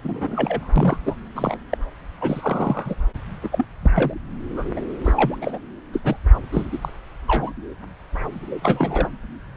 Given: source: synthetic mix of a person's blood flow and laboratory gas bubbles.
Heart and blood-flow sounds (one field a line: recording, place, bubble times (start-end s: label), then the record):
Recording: Doppler ultrasound of blood flow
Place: subclavian vein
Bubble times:
0.02-0.69 s: bubbles
0.76-0.99 s: bubbles
1.05-1.16 s: bubbles
1.35-1.59 s: bubbles
1.69-1.77 s: bubbles
2.21-2.95 s: bubbles
3.42-3.49 s: bubbles
3.52-3.66 s: bubbles
3.82-3.91 s: bubbles
3.94-4.14 s: bubbles
4.51-4.66 s: bubbles
4.76-4.81 s: bubbles
5.04-5.12 s: bubbles
5.16-5.36 s: bubbles
5.41-5.58 s: bubbles
5.93-6.01 s: bubbles
6.04-6.16 s: bubbles
6.52-6.66 s: bubbles
6.72-6.79 s: bubbles
6.82-6.89 s: bubbles
7.27-7.51 s: bubbles
8.62-9.09 s: bubbles
From the record:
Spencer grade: 3 (all of the cardiac periods contain showers or single bubble signals, but not dominating or overriding the cardiac motion signals)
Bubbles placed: anywhere in the cardiac cycle